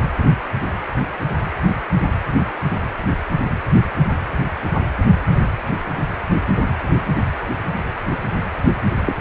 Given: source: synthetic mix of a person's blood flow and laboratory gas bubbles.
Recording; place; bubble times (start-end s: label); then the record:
Doppler ultrasound of blood flow; precordium
9.05-9.13 s: bubbles
From the record:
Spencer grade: 1 (occasional bubble signal discernible with the cardiac motion signal, with majority of cardiac periods free of bubbles); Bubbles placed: anywhere in the cardiac cycle